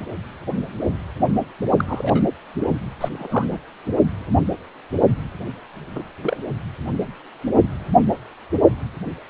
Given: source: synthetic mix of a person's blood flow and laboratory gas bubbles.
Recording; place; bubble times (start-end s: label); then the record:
Doppler ultrasound of blood flow; precordium
1.77-2.23 s: bubbles
3.00-3.59 s: bubbles
5.95-6.03 s: bubbles
6.23-6.37 s: bubbles
From the record:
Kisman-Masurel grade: 222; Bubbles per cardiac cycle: several, 3 to 8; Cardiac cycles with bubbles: 10 to 50%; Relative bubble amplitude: moderate (0.250 to 0.450); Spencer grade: 2 (many but less than half of the cardiac periods contain bubble signals, singularly or in groups); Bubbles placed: only in the low amplitude regions of the cardiac cycle